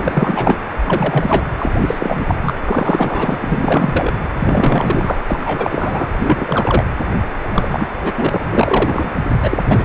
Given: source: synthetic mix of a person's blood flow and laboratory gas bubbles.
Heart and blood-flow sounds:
Doppler ultrasound of blood flow; precordium
0.00-0.56 s: bubbles
0.84-1.44 s: bubbles
1.59-2.53 s: bubbles
2.65-3.38 s: bubbles
3.41-4.13 s: bubbles
4.39-5.21 s: bubbles
5.28-6.08 s: bubbles
6.18-6.84 s: bubbles
7.53-7.87 s: bubbles
8.03-8.13 s: bubbles
8.17-8.41 s: bubbles
8.43-9.12 s: bubbles
9.42-9.58 s: bubbles
9.68-9.85 s: bubbles
From the record:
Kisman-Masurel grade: 343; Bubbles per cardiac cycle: rolling drumbeat, 9 or more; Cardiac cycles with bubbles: 100%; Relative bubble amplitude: loud (0.450 to 0.775); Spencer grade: 3 (all of the cardiac periods contain showers or single bubble signals, but not dominating or overriding the cardiac motion signals); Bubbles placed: anywhere in the cardiac cycle

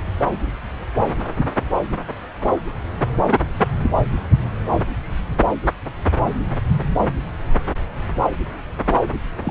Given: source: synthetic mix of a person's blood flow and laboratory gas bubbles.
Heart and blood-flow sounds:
Doppler ultrasound of blood flow; subclavian vein
9.45-9.51 s: bubbles
From the record:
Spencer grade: 1 (occasional bubble signal discernible with the cardiac motion signal, with majority of cardiac periods free of bubbles); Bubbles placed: anywhere in the cardiac cycle

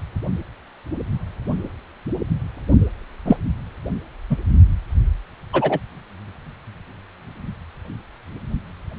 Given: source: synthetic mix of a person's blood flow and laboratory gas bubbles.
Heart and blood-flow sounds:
Doppler ultrasound of blood flow; precordium
3.25-3.37 s: bubbles
4.29-4.37 s: bubbles
5.52-5.79 s: bubbles
From the record:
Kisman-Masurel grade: 123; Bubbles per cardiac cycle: 1 to 2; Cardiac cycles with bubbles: 10 to 50%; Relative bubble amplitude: loud (0.450 to 0.775); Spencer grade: 2 (many but less than half of the cardiac periods contain bubble signals, singularly or in groups); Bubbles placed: only in the low amplitude regions of the cardiac cycle

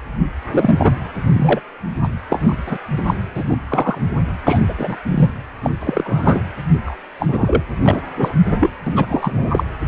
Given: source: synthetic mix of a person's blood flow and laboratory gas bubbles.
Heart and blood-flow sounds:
Doppler ultrasound of blood flow; precordium
0.51-0.91 s: bubbles
1.33-1.60 s: bubbles
2.03-2.08 s: bubbles
2.29-2.56 s: bubbles
2.65-2.77 s: bubbles
2.98-3.14 s: bubbles
3.34-3.44 s: bubbles
3.47-3.57 s: bubbles
3.69-3.99 s: bubbles
4.46-4.59 s: bubbles
4.67-4.74 s: bubbles
4.78-4.96 s: bubbles
5.04-5.30 s: bubbles
5.62-5.71 s: bubbles
5.80-6.41 s: bubbles
6.85-6.96 s: bubbles
7.19-7.62 s: bubbles
7.83-8.01 s: bubbles
8.16-8.33 s: bubbles
8.51-8.71 s: bubbles
8.86-9.63 s: bubbles
9.86-9.88 s: bubbles
From the record:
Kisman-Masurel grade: 243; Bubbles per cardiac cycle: several, 3 to 8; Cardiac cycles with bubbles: 100%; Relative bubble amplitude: loud (0.450 to 0.775); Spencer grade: 3 (all of the cardiac periods contain showers or single bubble signals, but not dominating or overriding the cardiac motion signals); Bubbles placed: anywhere in the cardiac cycle

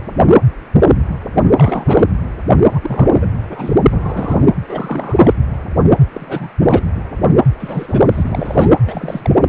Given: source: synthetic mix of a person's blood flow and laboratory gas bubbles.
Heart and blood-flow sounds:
Doppler ultrasound of blood flow; precordium
1.55-2.05 s: bubbles
2.50-2.55 s: bubbles
2.72-2.80 s: bubbles
2.83-3.28 s: bubbles
3.51-3.80 s: bubbles
3.91-4.48 s: bubbles
4.62-5.33 s: bubbles
6.11-6.52 s: bubbles
6.58-6.83 s: bubbles
7.59-8.05 s: bubbles
8.11-8.69 s: bubbles
8.87-9.38 s: bubbles
From the record:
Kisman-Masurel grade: 332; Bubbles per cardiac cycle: rolling drumbeat, 9 or more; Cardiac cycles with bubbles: 50 to 99%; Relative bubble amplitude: moderate (0.250 to 0.450); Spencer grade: 3 (all of the cardiac periods contain showers or single bubble signals, but not dominating or overriding the cardiac motion signals); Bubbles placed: anywhere in the cardiac cycle

